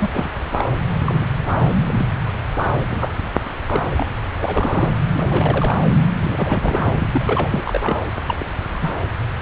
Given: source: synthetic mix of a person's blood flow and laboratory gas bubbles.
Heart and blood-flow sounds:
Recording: Doppler ultrasound of blood flow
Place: subclavian vein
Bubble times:
0.00-0.09 s: bubbles
0.11-0.30 s: bubbles
0.58-0.65 s: bubbles
1.04-1.25 s: bubbles
1.83-2.06 s: bubbles
2.90-3.13 s: bubbles
3.46-3.50 s: bubbles
3.67-4.06 s: bubbles
4.40-4.92 s: bubbles
5.14-5.76 s: bubbles
5.84-5.94 s: bubbles
6.20-7.62 s: bubbles
7.65-8.04 s: bubbles
8.27-8.47 s: bubbles
8.72-8.94 s: bubbles
From the record:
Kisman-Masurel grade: 242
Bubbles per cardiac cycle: several, 3 to 8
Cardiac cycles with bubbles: 100%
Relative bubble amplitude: moderate (0.250 to 0.450)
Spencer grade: 3 (all of the cardiac periods contain showers or single bubble signals, but not dominating or overriding the cardiac motion signals)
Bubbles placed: anywhere in the cardiac cycle

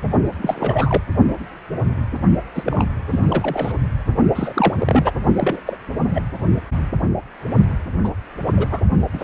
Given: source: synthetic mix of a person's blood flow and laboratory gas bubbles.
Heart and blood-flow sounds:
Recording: Doppler ultrasound of blood flow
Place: precordium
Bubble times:
0.41-1.02 s: bubbles
2.54-2.84 s: bubbles
3.10-3.19 s: bubbles
3.29-3.72 s: bubbles
4.35-5.12 s: bubbles
5.34-5.61 s: bubbles
5.66-5.78 s: bubbles
6.04-6.21 s: bubbles
8.04-8.09 s: bubbles
8.56-8.67 s: bubbles
8.71-8.81 s: bubbles
9.13-9.24 s: bubbles
From the record:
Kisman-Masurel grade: 232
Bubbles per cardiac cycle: several, 3 to 8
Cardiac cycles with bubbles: 50 to 99%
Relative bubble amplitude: moderate (0.250 to 0.450)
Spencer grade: 3 (all of the cardiac periods contain showers or single bubble signals, but not dominating or overriding the cardiac motion signals)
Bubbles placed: only in the low amplitude regions of the cardiac cycle

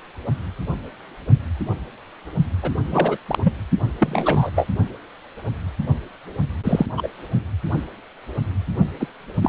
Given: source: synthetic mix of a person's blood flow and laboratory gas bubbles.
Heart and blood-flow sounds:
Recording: Doppler ultrasound of blood flow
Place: precordium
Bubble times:
2.62-2.71 s: bubbles
2.92-3.17 s: bubbles
3.26-3.52 s: bubbles
4.00-4.51 s: bubbles
4.55-4.67 s: bubbles
6.63-6.86 s: bubbles
6.96-7.08 s: bubbles
9.00-9.07 s: bubbles
9.42-9.49 s: bubbles
From the record:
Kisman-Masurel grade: 233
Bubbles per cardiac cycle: several, 3 to 8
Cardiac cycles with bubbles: 50 to 99%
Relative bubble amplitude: loud (0.450 to 0.775)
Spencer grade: 3 (all of the cardiac periods contain showers or single bubble signals, but not dominating or overriding the cardiac motion signals)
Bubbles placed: only in the low amplitude regions of the cardiac cycle

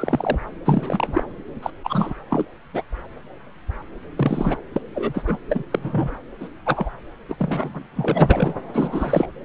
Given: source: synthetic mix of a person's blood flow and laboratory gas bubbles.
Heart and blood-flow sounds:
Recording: Doppler ultrasound of blood flow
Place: subclavian vein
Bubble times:
0.00-0.42 s: bubbles
0.65-1.23 s: bubbles
1.62-1.70 s: bubbles
1.83-2.12 s: bubbles
2.30-2.46 s: bubbles
2.73-2.83 s: bubbles
4.16-4.57 s: bubbles
4.73-4.82 s: bubbles
4.94-5.24 s: bubbles
5.27-5.38 s: bubbles
5.49-5.63 s: bubbles
5.71-6.17 s: bubbles
6.41-6.48 s: bubbles
6.66-6.90 s: bubbles
7.28-7.83 s: bubbles
7.96-8.54 s: bubbles
8.73-9.27 s: bubbles
From the record:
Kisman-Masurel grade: 233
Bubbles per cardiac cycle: several, 3 to 8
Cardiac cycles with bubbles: 50 to 99%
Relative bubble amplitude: loud (0.450 to 0.775)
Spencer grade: 3 (all of the cardiac periods contain showers or single bubble signals, but not dominating or overriding the cardiac motion signals)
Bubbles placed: anywhere in the cardiac cycle

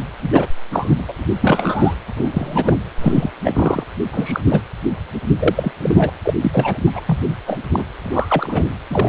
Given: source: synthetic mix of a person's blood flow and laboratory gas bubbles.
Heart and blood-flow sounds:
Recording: Doppler ultrasound of blood flow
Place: precordium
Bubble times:
0.22-0.29 s: bubbles
0.32-0.47 s: bubbles
0.73-1.26 s: bubbles
1.41-1.94 s: bubbles
2.16-2.77 s: bubbles
3.01-3.31 s: bubbles
3.44-3.84 s: bubbles
4.12-4.41 s: bubbles
4.48-4.61 s: bubbles
5.39-5.71 s: bubbles
5.82-6.12 s: bubbles
6.23-6.34 s: bubbles
6.41-6.77 s: bubbles
6.86-7.00 s: bubbles
7.06-7.37 s: bubbles
7.47-7.61 s: bubbles
7.71-7.84 s: bubbles
7.98-8.67 s: bubbles
8.90-9.09 s: bubbles
From the record:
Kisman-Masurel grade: 243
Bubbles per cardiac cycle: several, 3 to 8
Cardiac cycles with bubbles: 100%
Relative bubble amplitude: loud (0.450 to 0.775)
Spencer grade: 3 (all of the cardiac periods contain showers or single bubble signals, but not dominating or overriding the cardiac motion signals)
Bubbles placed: anywhere in the cardiac cycle

